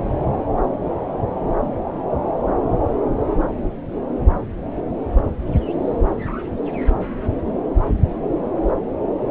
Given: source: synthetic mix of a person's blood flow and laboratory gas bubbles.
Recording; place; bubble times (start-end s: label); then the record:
Doppler ultrasound of blood flow; subclavian vein
6.73-6.79 s: bubbles
From the record:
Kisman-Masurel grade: 111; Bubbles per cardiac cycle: 1 to 2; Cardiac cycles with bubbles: 1 to 10%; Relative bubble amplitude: barely perceptible (0.100 to 0.250); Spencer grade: 1 (occasional bubble signal discernible with the cardiac motion signal, with majority of cardiac periods free of bubbles); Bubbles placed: anywhere in the cardiac cycle